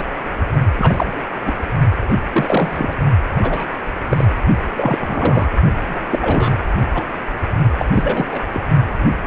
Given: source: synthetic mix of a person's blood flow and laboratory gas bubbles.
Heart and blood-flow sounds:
Doppler ultrasound of blood flow; precordium
0.00-0.05 s: bubbles
0.78-1.19 s: bubbles
1.46-1.53 s: bubbles
2.08-2.14 s: bubbles
2.33-2.94 s: bubbles
3.42-3.66 s: bubbles
4.11-4.25 s: bubbles
4.77-5.48 s: bubbles
5.87-6.63 s: bubbles
6.94-7.03 s: bubbles
7.78-7.86 s: bubbles
7.94-8.42 s: bubbles
8.53-8.62 s: bubbles
From the record:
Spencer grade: 3 (all of the cardiac periods contain showers or single bubble signals, but not dominating or overriding the cardiac motion signals); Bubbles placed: only in the low amplitude regions of the cardiac cycle

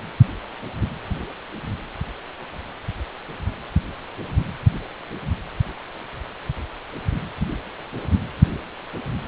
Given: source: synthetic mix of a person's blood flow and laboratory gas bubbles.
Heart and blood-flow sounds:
Doppler ultrasound of blood flow; precordium
no bubbles
From the record:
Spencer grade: 0 (complete lack of bubble signals)

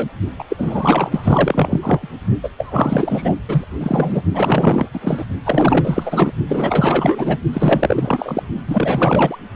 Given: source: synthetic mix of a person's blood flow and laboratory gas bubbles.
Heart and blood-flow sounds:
Doppler ultrasound of blood flow; precordium
0.00-0.09 s: bubbles
0.39-0.44 s: bubbles
0.49-1.79 s: bubbles
1.82-2.09 s: bubbles
2.43-2.50 s: bubbles
2.58-3.35 s: bubbles
3.48-3.67 s: bubbles
3.80-4.23 s: bubbles
4.32-4.86 s: bubbles
4.93-5.25 s: bubbles
5.46-6.32 s: bubbles
6.49-7.38 s: bubbles
7.53-8.43 s: bubbles
8.67-9.38 s: bubbles
From the record:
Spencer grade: 4 (maximum detectable bubble signal sounding continuously throughout systole and diastole of every cardiac period, and overriding the amplitude of the normal cardiac signals); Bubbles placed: only in the low amplitude regions of the cardiac cycle

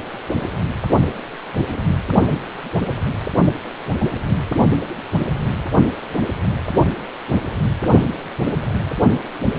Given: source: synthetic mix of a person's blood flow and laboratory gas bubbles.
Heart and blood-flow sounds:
Doppler ultrasound of blood flow; precordium
no bubbles
From the record:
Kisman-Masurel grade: 000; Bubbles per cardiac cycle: 0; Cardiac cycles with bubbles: 0%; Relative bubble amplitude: no bubbles discernible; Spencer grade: 0 (complete lack of bubble signals)

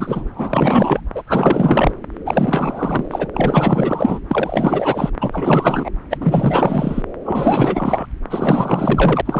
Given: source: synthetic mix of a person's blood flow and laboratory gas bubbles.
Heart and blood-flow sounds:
Doppler ultrasound of blood flow; subclavian vein
0.00-0.29 s: bubbles
0.35-1.00 s: bubbles
1.15-1.23 s: bubbles
1.27-1.92 s: bubbles
2.25-3.27 s: bubbles
3.33-4.20 s: bubbles
4.29-5.10 s: bubbles
5.20-5.89 s: bubbles
6.10-6.17 s: bubbles
6.20-7.02 s: bubbles
7.25-8.06 s: bubbles
8.30-9.21 s: bubbles
9.25-9.40 s: bubbles
From the record:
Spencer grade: 4 (maximum detectable bubble signal sounding continuously throughout systole and diastole of every cardiac period, and overriding the amplitude of the normal cardiac signals); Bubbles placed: anywhere in the cardiac cycle

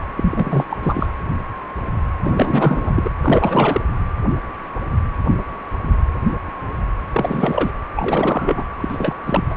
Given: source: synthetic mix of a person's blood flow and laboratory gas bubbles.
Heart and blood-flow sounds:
Doppler ultrasound of blood flow; precordium
0.17-0.64 s: bubbles
0.70-0.78 s: bubbles
0.82-1.12 s: bubbles
2.23-3.09 s: bubbles
3.22-3.81 s: bubbles
7.12-7.71 s: bubbles
7.96-8.64 s: bubbles
8.78-9.14 s: bubbles
9.26-9.43 s: bubbles
9.50-9.54 s: bubbles
From the record:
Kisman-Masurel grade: 332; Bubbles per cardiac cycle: rolling drumbeat, 9 or more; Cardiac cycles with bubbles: 50 to 99%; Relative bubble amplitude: moderate (0.250 to 0.450); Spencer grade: 3 (all of the cardiac periods contain showers or single bubble signals, but not dominating or overriding the cardiac motion signals); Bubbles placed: anywhere in the cardiac cycle

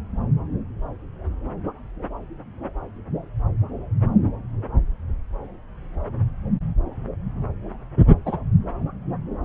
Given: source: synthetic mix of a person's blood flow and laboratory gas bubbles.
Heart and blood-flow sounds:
Doppler ultrasound of blood flow; subclavian vein
8.25-8.38 s: bubbles
From the record:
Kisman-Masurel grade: 112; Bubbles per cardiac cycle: 1 to 2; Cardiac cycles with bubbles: 1 to 10%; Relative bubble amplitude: moderate (0.250 to 0.450); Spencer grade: 1 (occasional bubble signal discernible with the cardiac motion signal, with majority of cardiac periods free of bubbles); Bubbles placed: anywhere in the cardiac cycle

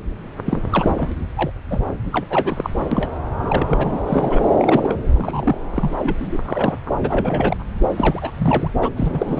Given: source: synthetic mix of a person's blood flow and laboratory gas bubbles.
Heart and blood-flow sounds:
Doppler ultrasound of blood flow; subclavian vein
0.45-0.61 s: bubbles
0.70-1.10 s: bubbles
1.36-1.51 s: bubbles
1.70-1.80 s: bubbles
2.12-2.26 s: bubbles
2.30-2.70 s: bubbles
2.91-3.22 s: bubbles
3.41-3.99 s: bubbles
4.07-4.42 s: bubbles
4.58-4.95 s: bubbles
5.07-5.58 s: bubbles
5.71-5.91 s: bubbles
5.97-6.16 s: bubbles
6.20-6.38 s: bubbles
6.45-6.75 s: bubbles
7.01-7.57 s: bubbles
7.96-8.30 s: bubbles
8.38-8.71 s: bubbles
8.81-8.89 s: bubbles
8.96-9.40 s: bubbles
From the record:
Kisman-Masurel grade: 242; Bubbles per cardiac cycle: several, 3 to 8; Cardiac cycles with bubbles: 100%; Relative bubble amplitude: moderate (0.250 to 0.450); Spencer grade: 3 (all of the cardiac periods contain showers or single bubble signals, but not dominating or overriding the cardiac motion signals); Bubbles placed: anywhere in the cardiac cycle

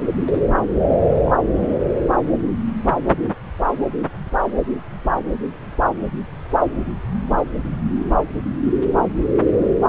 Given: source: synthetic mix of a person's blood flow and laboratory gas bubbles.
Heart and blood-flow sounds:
Doppler ultrasound of blood flow; subclavian vein
1.21-1.31 s: bubbles
1.60-1.68 s: bubbles
From the record:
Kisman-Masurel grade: 111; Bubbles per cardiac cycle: 1 to 2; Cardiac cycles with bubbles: 1 to 10%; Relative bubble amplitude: barely perceptible (0.100 to 0.250); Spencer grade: 1 (occasional bubble signal discernible with the cardiac motion signal, with majority of cardiac periods free of bubbles); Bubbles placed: anywhere in the cardiac cycle

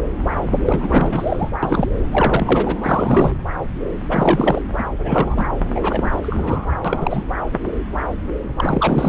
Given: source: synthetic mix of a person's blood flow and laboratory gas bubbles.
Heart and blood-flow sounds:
Doppler ultrasound of blood flow; subclavian vein
0.65-1.52 s: bubbles
1.62-1.88 s: bubbles
2.12-2.77 s: bubbles
2.83-3.32 s: bubbles
4.10-4.62 s: bubbles
4.78-4.83 s: bubbles
4.98-5.49 s: bubbles
5.75-6.10 s: bubbles
6.12-6.19 s: bubbles
6.21-6.67 s: bubbles
6.84-7.24 s: bubbles
8.56-9.09 s: bubbles
From the record:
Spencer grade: 3 (all of the cardiac periods contain showers or single bubble signals, but not dominating or overriding the cardiac motion signals); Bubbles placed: anywhere in the cardiac cycle

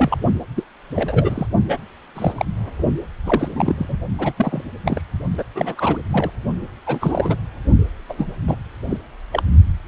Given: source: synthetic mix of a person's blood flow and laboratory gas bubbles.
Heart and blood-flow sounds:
Doppler ultrasound of blood flow; precordium
0.00-0.17 s: bubbles
0.55-0.64 s: bubbles
0.95-1.47 s: bubbles
1.68-1.78 s: bubbles
2.15-2.33 s: bubbles
2.38-2.46 s: bubbles
3.25-3.48 s: bubbles
3.56-3.85 s: bubbles
3.88-3.99 s: bubbles
4.18-4.33 s: bubbles
4.37-4.63 s: bubbles
4.85-5.01 s: bubbles
5.38-5.43 s: bubbles
5.54-5.97 s: bubbles
6.11-6.31 s: bubbles
6.86-7.35 s: bubbles
8.09-8.30 s: bubbles
8.47-8.55 s: bubbles
8.89-8.97 s: bubbles
9.32-9.43 s: bubbles
From the record:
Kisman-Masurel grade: 232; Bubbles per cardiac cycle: several, 3 to 8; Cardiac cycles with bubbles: 50 to 99%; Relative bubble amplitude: moderate (0.250 to 0.450); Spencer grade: 3 (all of the cardiac periods contain showers or single bubble signals, but not dominating or overriding the cardiac motion signals); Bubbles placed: only in the low amplitude regions of the cardiac cycle

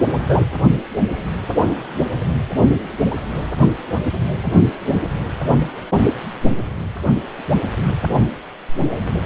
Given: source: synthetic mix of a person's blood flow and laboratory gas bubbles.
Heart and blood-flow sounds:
Doppler ultrasound of blood flow; precordium
0.28-0.42 s: bubbles
From the record:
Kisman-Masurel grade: 113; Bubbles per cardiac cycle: 1 to 2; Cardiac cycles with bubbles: 1 to 10%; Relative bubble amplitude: loud (0.450 to 0.775); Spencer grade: 1 (occasional bubble signal discernible with the cardiac motion signal, with majority of cardiac periods free of bubbles); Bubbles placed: anywhere in the cardiac cycle

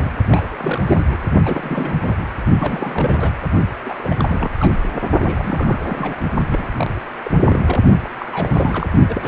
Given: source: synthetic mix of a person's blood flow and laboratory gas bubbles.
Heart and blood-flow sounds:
Doppler ultrasound of blood flow; precordium
0.00-0.11 s: bubbles
0.29-1.18 s: bubbles
1.44-1.95 s: bubbles
2.04-2.25 s: bubbles
2.60-3.33 s: bubbles
3.85-4.14 s: bubbles
4.17-4.54 s: bubbles
4.59-4.75 s: bubbles
5.20-5.86 s: bubbles
5.88-6.17 s: bubbles
6.50-6.63 s: bubbles
6.69-7.01 s: bubbles
7.24-7.80 s: bubbles
8.03-8.10 s: bubbles
8.20-8.92 s: bubbles
9.07-9.28 s: bubbles
From the record:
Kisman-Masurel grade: 342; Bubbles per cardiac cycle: rolling drumbeat, 9 or more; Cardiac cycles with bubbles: 100%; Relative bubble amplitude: moderate (0.250 to 0.450); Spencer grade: 3 (all of the cardiac periods contain showers or single bubble signals, but not dominating or overriding the cardiac motion signals); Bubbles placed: only in the low amplitude regions of the cardiac cycle

